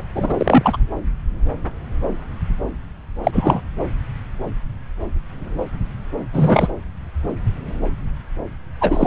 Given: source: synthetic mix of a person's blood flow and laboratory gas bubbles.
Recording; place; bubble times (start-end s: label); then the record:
Doppler ultrasound of blood flow; subclavian vein
0.15-0.34 s: bubbles
0.40-0.78 s: bubbles
3.23-3.61 s: bubbles
6.33-6.68 s: bubbles
8.80-9.07 s: bubbles
From the record:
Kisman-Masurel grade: 223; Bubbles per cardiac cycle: several, 3 to 8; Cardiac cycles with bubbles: 10 to 50%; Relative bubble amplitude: loud (0.450 to 0.775); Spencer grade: 2 (many but less than half of the cardiac periods contain bubble signals, singularly or in groups); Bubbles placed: anywhere in the cardiac cycle